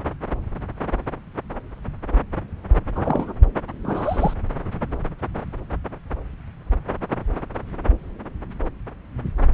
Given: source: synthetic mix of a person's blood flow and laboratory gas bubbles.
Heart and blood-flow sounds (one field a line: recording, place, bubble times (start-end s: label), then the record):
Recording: Doppler ultrasound of blood flow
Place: subclavian vein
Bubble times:
2.96-3.33 s: bubbles
3.83-4.33 s: bubbles
From the record:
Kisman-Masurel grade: 122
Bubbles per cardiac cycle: 1 to 2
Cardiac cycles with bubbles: 10 to 50%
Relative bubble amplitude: moderate (0.250 to 0.450)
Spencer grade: 2 (many but less than half of the cardiac periods contain bubble signals, singularly or in groups)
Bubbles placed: anywhere in the cardiac cycle